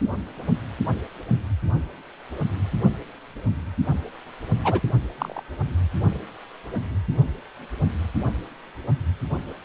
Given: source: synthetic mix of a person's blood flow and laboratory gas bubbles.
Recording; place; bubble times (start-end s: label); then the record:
Doppler ultrasound of blood flow; precordium
4.64-4.80 s: bubbles
5.18-5.43 s: bubbles
From the record:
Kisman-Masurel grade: 112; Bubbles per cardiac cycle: 1 to 2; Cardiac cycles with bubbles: 1 to 10%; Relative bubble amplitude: moderate (0.250 to 0.450); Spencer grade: 1 (occasional bubble signal discernible with the cardiac motion signal, with majority of cardiac periods free of bubbles); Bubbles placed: only in the low amplitude regions of the cardiac cycle